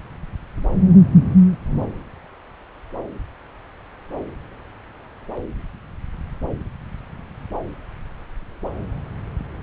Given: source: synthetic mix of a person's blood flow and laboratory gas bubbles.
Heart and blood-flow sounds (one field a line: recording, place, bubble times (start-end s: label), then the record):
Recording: Doppler ultrasound of blood flow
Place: subclavian vein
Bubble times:
no bubbles
From the record:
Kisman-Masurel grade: 000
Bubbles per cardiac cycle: 0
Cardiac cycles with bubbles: 0%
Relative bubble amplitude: no bubbles discernible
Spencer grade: 0 (complete lack of bubble signals)